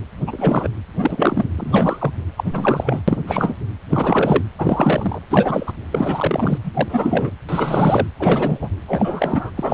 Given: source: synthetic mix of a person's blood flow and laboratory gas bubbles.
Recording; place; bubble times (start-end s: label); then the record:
Doppler ultrasound of blood flow; precordium
0.00-0.05 s: bubbles
0.27-0.68 s: bubbles
0.98-1.47 s: bubbles
1.55-2.12 s: bubbles
2.37-2.44 s: bubbles
2.53-3.01 s: bubbles
3.08-3.18 s: bubbles
3.27-3.54 s: bubbles
3.89-4.44 s: bubbles
4.58-5.19 s: bubbles
5.30-5.72 s: bubbles
5.90-6.58 s: bubbles
6.64-7.30 s: bubbles
7.48-8.08 s: bubbles
8.20-8.59 s: bubbles
8.61-8.69 s: bubbles
8.88-9.51 s: bubbles
9.56-9.74 s: bubbles
From the record:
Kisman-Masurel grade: 333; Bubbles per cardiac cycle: rolling drumbeat, 9 or more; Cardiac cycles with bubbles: 50 to 99%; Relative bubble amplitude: loud (0.450 to 0.775); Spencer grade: 3 (all of the cardiac periods contain showers or single bubble signals, but not dominating or overriding the cardiac motion signals); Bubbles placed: anywhere in the cardiac cycle